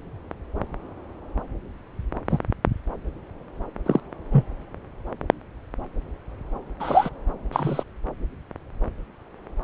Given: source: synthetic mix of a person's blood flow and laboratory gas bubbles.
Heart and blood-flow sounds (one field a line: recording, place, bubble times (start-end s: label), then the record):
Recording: Doppler ultrasound of blood flow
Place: subclavian vein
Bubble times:
2.29-2.39 s: bubbles
3.85-4.00 s: bubbles
4.32-4.44 s: bubbles
6.79-7.10 s: bubbles
7.52-7.83 s: bubbles
From the record:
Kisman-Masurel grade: 123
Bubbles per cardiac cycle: 1 to 2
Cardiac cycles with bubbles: 10 to 50%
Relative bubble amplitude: loud (0.450 to 0.775)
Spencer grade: 2 (many but less than half of the cardiac periods contain bubble signals, singularly or in groups)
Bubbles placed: anywhere in the cardiac cycle